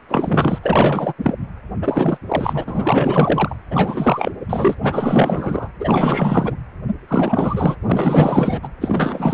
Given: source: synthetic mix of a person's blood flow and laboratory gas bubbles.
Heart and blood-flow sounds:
Doppler ultrasound of blood flow; precordium
0.08-0.58 s: bubbles
0.62-1.13 s: bubbles
1.18-1.36 s: bubbles
1.82-2.17 s: bubbles
2.28-3.56 s: bubbles
3.70-4.32 s: bubbles
4.49-4.75 s: bubbles
4.83-5.68 s: bubbles
5.79-6.55 s: bubbles
7.07-7.75 s: bubbles
7.86-8.60 s: bubbles
8.62-8.69 s: bubbles
8.80-9.34 s: bubbles
From the record:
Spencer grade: 4 (maximum detectable bubble signal sounding continuously throughout systole and diastole of every cardiac period, and overriding the amplitude of the normal cardiac signals); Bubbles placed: anywhere in the cardiac cycle

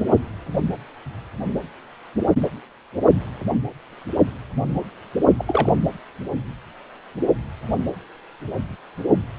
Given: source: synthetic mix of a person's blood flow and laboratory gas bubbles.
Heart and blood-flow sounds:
Doppler ultrasound of blood flow; precordium
5.38-5.72 s: bubbles
From the record:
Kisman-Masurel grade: 212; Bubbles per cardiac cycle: several, 3 to 8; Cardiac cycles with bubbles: 1 to 10%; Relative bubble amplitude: moderate (0.250 to 0.450); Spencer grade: 1 (occasional bubble signal discernible with the cardiac motion signal, with majority of cardiac periods free of bubbles); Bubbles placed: anywhere in the cardiac cycle

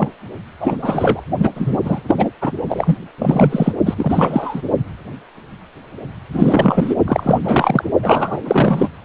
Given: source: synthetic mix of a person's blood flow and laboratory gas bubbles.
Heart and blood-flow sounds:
Doppler ultrasound of blood flow; precordium
0.00-0.09 s: bubbles
0.59-0.77 s: bubbles
0.82-1.21 s: bubbles
1.38-1.50 s: bubbles
1.56-1.77 s: bubbles
1.85-2.00 s: bubbles
2.07-2.31 s: bubbles
2.41-2.52 s: bubbles
2.69-2.98 s: bubbles
3.18-3.72 s: bubbles
3.86-3.94 s: bubbles
3.97-4.63 s: bubbles
6.32-6.96 s: bubbles
7.07-7.39 s: bubbles
7.42-7.84 s: bubbles
8.02-8.88 s: bubbles
From the record:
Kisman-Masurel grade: 333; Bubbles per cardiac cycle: rolling drumbeat, 9 or more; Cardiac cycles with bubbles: 50 to 99%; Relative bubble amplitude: loud (0.450 to 0.775); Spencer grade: 3 (all of the cardiac periods contain showers or single bubble signals, but not dominating or overriding the cardiac motion signals); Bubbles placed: only in the low amplitude regions of the cardiac cycle

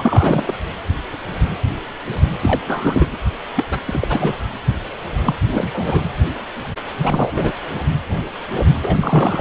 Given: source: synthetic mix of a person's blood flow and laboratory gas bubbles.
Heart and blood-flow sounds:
Doppler ultrasound of blood flow; precordium
0.00-0.54 s: bubbles
2.41-2.61 s: bubbles
2.67-3.17 s: bubbles
3.55-3.65 s: bubbles
3.71-3.79 s: bubbles
3.87-4.33 s: bubbles
5.25-5.35 s: bubbles
5.49-6.09 s: bubbles
6.99-7.52 s: bubbles
8.81-9.41 s: bubbles
From the record:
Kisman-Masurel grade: 332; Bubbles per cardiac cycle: rolling drumbeat, 9 or more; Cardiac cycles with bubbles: 50 to 99%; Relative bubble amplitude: moderate (0.250 to 0.450); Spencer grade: 3 (all of the cardiac periods contain showers or single bubble signals, but not dominating or overriding the cardiac motion signals); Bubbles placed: anywhere in the cardiac cycle

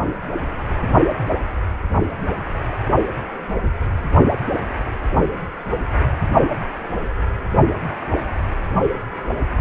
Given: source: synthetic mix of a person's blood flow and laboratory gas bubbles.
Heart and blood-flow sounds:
Doppler ultrasound of blood flow; precordium
no bubbles
From the record:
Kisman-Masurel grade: 000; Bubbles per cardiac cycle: 0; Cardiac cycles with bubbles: 0%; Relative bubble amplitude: no bubbles discernible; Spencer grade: 0 (complete lack of bubble signals)

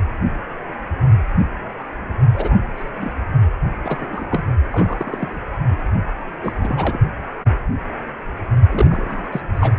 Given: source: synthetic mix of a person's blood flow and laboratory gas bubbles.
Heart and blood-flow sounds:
Doppler ultrasound of blood flow; precordium
2.33-2.57 s: bubbles
2.77-3.12 s: bubbles
3.84-4.27 s: bubbles
4.31-4.51 s: bubbles
4.71-5.44 s: bubbles
6.42-6.53 s: bubbles
6.58-6.99 s: bubbles
8.71-9.29 s: bubbles
9.32-9.41 s: bubbles
9.54-9.75 s: bubbles
From the record:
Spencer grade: 3 (all of the cardiac periods contain showers or single bubble signals, but not dominating or overriding the cardiac motion signals); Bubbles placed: only in the low amplitude regions of the cardiac cycle

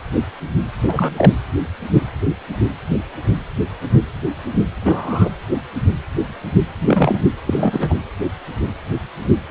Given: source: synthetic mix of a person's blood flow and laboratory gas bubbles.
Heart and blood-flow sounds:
Doppler ultrasound of blood flow; precordium
0.87-1.32 s: bubbles
4.80-5.31 s: bubbles
6.78-7.20 s: bubbles
7.46-7.96 s: bubbles
From the record:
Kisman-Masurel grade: 223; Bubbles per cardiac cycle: several, 3 to 8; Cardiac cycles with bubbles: 10 to 50%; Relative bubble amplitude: loud (0.450 to 0.775); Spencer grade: 2 (many but less than half of the cardiac periods contain bubble signals, singularly or in groups); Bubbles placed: anywhere in the cardiac cycle

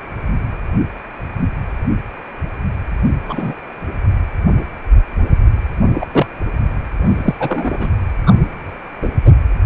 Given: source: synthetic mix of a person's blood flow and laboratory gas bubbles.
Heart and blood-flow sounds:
Doppler ultrasound of blood flow; precordium
3.25-3.54 s: bubbles
5.94-6.06 s: bubbles
6.12-6.26 s: bubbles
7.02-7.36 s: bubbles
7.39-7.93 s: bubbles
8.27-8.35 s: bubbles
9.02-9.10 s: bubbles
9.25-9.31 s: bubbles
From the record:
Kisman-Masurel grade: 223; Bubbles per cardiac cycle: several, 3 to 8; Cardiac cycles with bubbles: 10 to 50%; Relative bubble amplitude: loud (0.450 to 0.775); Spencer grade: 2 (many but less than half of the cardiac periods contain bubble signals, singularly or in groups); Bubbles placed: anywhere in the cardiac cycle

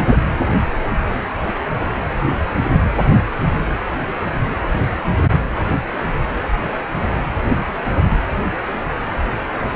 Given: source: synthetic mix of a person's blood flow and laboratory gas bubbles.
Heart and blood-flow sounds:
Doppler ultrasound of blood flow; precordium
0.00-0.16 s: bubbles
From the record:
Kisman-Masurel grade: 113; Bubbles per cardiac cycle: 1 to 2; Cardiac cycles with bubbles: 1 to 10%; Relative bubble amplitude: loud (0.450 to 0.775); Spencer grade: 1 (occasional bubble signal discernible with the cardiac motion signal, with majority of cardiac periods free of bubbles); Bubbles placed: anywhere in the cardiac cycle

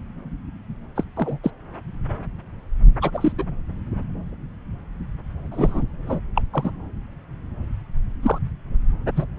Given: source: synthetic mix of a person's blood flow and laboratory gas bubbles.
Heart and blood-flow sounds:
Doppler ultrasound of blood flow; subclavian vein
0.95-1.03 s: bubbles
1.17-1.39 s: bubbles
1.44-1.50 s: bubbles
3.01-3.10 s: bubbles
3.14-3.33 s: bubbles
3.38-3.45 s: bubbles
5.51-5.83 s: bubbles
6.07-6.20 s: bubbles
6.35-6.42 s: bubbles
6.53-6.71 s: bubbles
8.22-8.38 s: bubbles
9.16-9.24 s: bubbles
From the record:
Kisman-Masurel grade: 232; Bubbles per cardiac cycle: several, 3 to 8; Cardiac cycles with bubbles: 50 to 99%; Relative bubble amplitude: moderate (0.250 to 0.450); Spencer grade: 3 (all of the cardiac periods contain showers or single bubble signals, but not dominating or overriding the cardiac motion signals); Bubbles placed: anywhere in the cardiac cycle

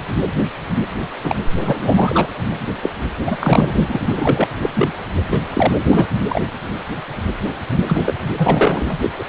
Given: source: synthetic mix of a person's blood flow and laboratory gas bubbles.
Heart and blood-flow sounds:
Doppler ultrasound of blood flow; precordium
1.23-1.36 s: bubbles
1.59-2.28 s: bubbles
2.82-2.91 s: bubbles
3.26-3.36 s: bubbles
3.39-3.75 s: bubbles
3.88-3.99 s: bubbles
4.05-4.48 s: bubbles
4.62-4.72 s: bubbles
4.75-4.88 s: bubbles
5.29-5.40 s: bubbles
5.54-5.79 s: bubbles
5.91-6.08 s: bubbles
6.29-6.41 s: bubbles
7.88-8.03 s: bubbles
8.06-8.15 s: bubbles
8.37-8.98 s: bubbles
9.01-9.10 s: bubbles
9.19-9.25 s: bubbles
From the record:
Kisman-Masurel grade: 333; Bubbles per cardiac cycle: rolling drumbeat, 9 or more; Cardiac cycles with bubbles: 50 to 99%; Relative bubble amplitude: loud (0.450 to 0.775); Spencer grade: 3 (all of the cardiac periods contain showers or single bubble signals, but not dominating or overriding the cardiac motion signals); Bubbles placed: anywhere in the cardiac cycle

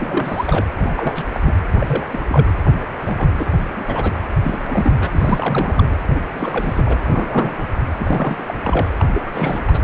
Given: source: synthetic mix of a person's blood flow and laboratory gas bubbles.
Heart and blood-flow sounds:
Doppler ultrasound of blood flow; precordium
0.00-0.65 s: bubbles
0.77-0.92 s: bubbles
0.96-1.25 s: bubbles
1.32-1.40 s: bubbles
1.43-1.54 s: bubbles
1.72-2.05 s: bubbles
2.12-2.24 s: bubbles
2.29-2.52 s: bubbles
3.04-3.29 s: bubbles
3.35-3.52 s: bubbles
3.65-4.18 s: bubbles
4.43-5.96 s: bubbles
6.15-6.20 s: bubbles
6.33-7.66 s: bubbles
7.97-8.54 s: bubbles
8.60-8.91 s: bubbles
9.00-9.05 s: bubbles
9.14-9.22 s: bubbles
9.26-9.30 s: bubbles
9.33-9.64 s: bubbles
9.67-9.81 s: bubbles
From the record:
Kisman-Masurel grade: 342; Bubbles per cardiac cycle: rolling drumbeat, 9 or more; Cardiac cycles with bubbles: 100%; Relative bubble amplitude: moderate (0.250 to 0.450); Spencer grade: 3 (all of the cardiac periods contain showers or single bubble signals, but not dominating or overriding the cardiac motion signals); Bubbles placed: anywhere in the cardiac cycle

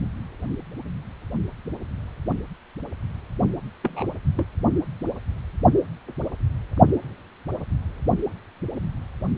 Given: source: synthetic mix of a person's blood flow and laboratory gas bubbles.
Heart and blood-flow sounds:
Doppler ultrasound of blood flow; precordium
3.83-4.04 s: bubbles
4.37-4.45 s: bubbles
From the record:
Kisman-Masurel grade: 111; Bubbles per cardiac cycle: 1 to 2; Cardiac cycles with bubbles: 1 to 10%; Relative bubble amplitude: barely perceptible (0.100 to 0.250); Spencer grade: 1 (occasional bubble signal discernible with the cardiac motion signal, with majority of cardiac periods free of bubbles); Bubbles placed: only in the low amplitude regions of the cardiac cycle

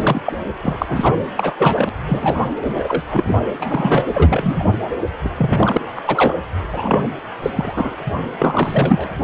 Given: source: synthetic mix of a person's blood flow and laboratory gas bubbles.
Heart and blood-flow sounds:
Doppler ultrasound of blood flow; precordium
0.00-0.21 s: bubbles
0.25-0.33 s: bubbles
0.61-0.78 s: bubbles
0.81-1.17 s: bubbles
1.35-1.54 s: bubbles
1.58-1.90 s: bubbles
2.06-2.46 s: bubbles
2.64-3.04 s: bubbles
3.10-3.35 s: bubbles
3.60-4.07 s: bubbles
4.14-4.73 s: bubbles
5.24-5.29 s: bubbles
5.37-5.79 s: bubbles
5.95-6.02 s: bubbles
6.06-6.36 s: bubbles
6.71-7.03 s: bubbles
7.42-7.51 s: bubbles
7.55-7.74 s: bubbles
7.77-7.97 s: bubbles
8.07-8.12 s: bubbles
8.39-9.08 s: bubbles
From the record:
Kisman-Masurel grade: 243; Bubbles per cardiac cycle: several, 3 to 8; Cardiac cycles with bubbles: 100%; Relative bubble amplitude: loud (0.450 to 0.775); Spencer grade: 3 (all of the cardiac periods contain showers or single bubble signals, but not dominating or overriding the cardiac motion signals); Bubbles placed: anywhere in the cardiac cycle

